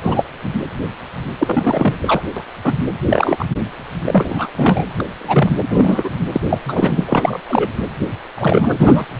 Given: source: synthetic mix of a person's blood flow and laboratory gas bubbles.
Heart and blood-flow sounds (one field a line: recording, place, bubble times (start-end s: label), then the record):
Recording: Doppler ultrasound of blood flow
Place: precordium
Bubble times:
0.01-0.24 s: bubbles
0.43-0.50 s: bubbles
1.38-1.98 s: bubbles
2.02-2.21 s: bubbles
2.37-2.45 s: bubbles
2.64-2.73 s: bubbles
3.10-3.45 s: bubbles
4.05-4.49 s: bubbles
4.57-4.84 s: bubbles
5.00-5.03 s: bubbles
5.18-5.51 s: bubbles
5.69-6.10 s: bubbles
6.32-6.41 s: bubbles
6.50-6.58 s: bubbles
6.65-7.04 s: bubbles
7.07-7.40 s: bubbles
7.48-7.69 s: bubbles
8.38-8.78 s: bubbles
8.80-9.06 s: bubbles
From the record:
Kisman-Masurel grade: 243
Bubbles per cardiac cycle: several, 3 to 8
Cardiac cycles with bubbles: 100%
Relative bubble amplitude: loud (0.450 to 0.775)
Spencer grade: 3 (all of the cardiac periods contain showers or single bubble signals, but not dominating or overriding the cardiac motion signals)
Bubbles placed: anywhere in the cardiac cycle